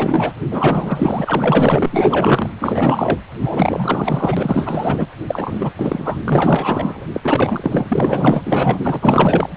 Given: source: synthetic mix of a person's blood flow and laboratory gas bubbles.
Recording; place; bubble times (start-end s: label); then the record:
Doppler ultrasound of blood flow; precordium
0.00-0.33 s: bubbles
0.50-1.89 s: bubbles
1.92-2.50 s: bubbles
2.60-3.19 s: bubbles
3.41-5.07 s: bubbles
5.27-5.72 s: bubbles
5.75-6.19 s: bubbles
6.24-7.05 s: bubbles
7.13-7.20 s: bubbles
7.23-8.42 s: bubbles
8.45-8.80 s: bubbles
8.83-9.51 s: bubbles
From the record:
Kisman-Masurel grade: 444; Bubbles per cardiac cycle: continuous sound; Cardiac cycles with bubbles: 100%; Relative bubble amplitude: maximal (0.775 to 0.999); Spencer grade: 4 (maximum detectable bubble signal sounding continuously throughout systole and diastole of every cardiac period, and overriding the amplitude of the normal cardiac signals); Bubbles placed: anywhere in the cardiac cycle